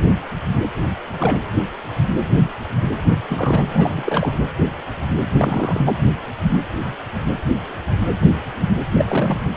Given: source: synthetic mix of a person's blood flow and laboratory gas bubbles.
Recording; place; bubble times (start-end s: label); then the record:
Doppler ultrasound of blood flow; precordium
1.19-1.41 s: bubbles
3.29-3.65 s: bubbles
3.72-4.32 s: bubbles
5.29-5.81 s: bubbles
5.86-5.94 s: bubbles
8.90-9.05 s: bubbles
9.09-9.40 s: bubbles
From the record:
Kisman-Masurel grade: 222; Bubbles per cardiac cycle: several, 3 to 8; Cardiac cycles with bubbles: 10 to 50%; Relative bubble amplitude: moderate (0.250 to 0.450); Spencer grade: 2 (many but less than half of the cardiac periods contain bubble signals, singularly or in groups); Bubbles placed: anywhere in the cardiac cycle